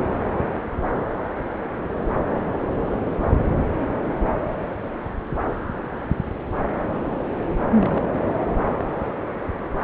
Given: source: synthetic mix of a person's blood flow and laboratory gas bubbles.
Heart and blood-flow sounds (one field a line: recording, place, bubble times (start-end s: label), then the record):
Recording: Doppler ultrasound of blood flow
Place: subclavian vein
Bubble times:
7.77-8.08 s: bubbles
From the record:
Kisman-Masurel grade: 211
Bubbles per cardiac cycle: several, 3 to 8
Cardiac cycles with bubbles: 1 to 10%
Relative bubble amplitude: barely perceptible (0.100 to 0.250)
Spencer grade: 1 (occasional bubble signal discernible with the cardiac motion signal, with majority of cardiac periods free of bubbles)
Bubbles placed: anywhere in the cardiac cycle